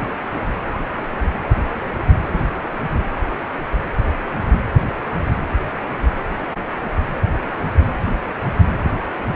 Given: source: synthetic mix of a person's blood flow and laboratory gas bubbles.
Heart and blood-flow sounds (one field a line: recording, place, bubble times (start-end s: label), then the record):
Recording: Doppler ultrasound of blood flow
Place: precordium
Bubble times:
no bubbles
From the record:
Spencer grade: 0 (complete lack of bubble signals)